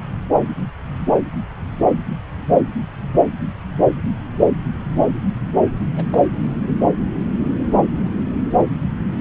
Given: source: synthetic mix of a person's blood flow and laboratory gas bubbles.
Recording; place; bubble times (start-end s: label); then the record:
Doppler ultrasound of blood flow; subclavian vein
5.96-6.04 s: bubbles
6.12-6.21 s: bubbles
6.35-6.72 s: bubbles
From the record:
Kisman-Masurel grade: 211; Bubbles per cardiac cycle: several, 3 to 8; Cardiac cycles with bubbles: 1 to 10%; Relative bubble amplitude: barely perceptible (0.100 to 0.250); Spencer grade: 1 (occasional bubble signal discernible with the cardiac motion signal, with majority of cardiac periods free of bubbles); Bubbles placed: anywhere in the cardiac cycle